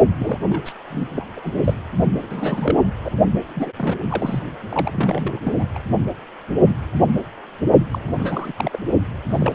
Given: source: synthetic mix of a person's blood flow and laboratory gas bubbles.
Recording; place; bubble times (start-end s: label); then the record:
Doppler ultrasound of blood flow; precordium
0.19-0.38 s: bubbles
0.42-0.73 s: bubbles
0.90-1.08 s: bubbles
1.15-1.25 s: bubbles
1.36-1.40 s: bubbles
1.43-1.61 s: bubbles
1.64-1.73 s: bubbles
2.23-2.76 s: bubbles
3.05-3.12 s: bubbles
3.49-3.72 s: bubbles
3.77-3.96 s: bubbles
4.09-4.42 s: bubbles
4.69-5.41 s: bubbles
5.44-5.52 s: bubbles
5.59-5.64 s: bubbles
5.75-5.79 s: bubbles
7.91-7.99 s: bubbles
8.07-8.14 s: bubbles
8.19-8.53 s: bubbles
8.56-8.79 s: bubbles
9.29-9.55 s: bubbles
From the record:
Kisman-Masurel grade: 332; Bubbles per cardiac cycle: rolling drumbeat, 9 or more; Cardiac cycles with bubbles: 50 to 99%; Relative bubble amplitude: moderate (0.250 to 0.450); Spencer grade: 3 (all of the cardiac periods contain showers or single bubble signals, but not dominating or overriding the cardiac motion signals); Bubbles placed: only in the low amplitude regions of the cardiac cycle